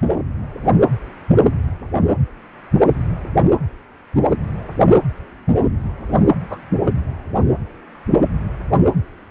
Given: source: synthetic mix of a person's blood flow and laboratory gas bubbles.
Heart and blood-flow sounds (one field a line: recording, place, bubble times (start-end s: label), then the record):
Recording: Doppler ultrasound of blood flow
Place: precordium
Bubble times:
6.42-6.58 s: bubbles
From the record:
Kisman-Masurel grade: 111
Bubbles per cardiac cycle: 1 to 2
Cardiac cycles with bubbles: 1 to 10%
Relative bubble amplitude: barely perceptible (0.100 to 0.250)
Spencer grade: 1 (occasional bubble signal discernible with the cardiac motion signal, with majority of cardiac periods free of bubbles)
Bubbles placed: anywhere in the cardiac cycle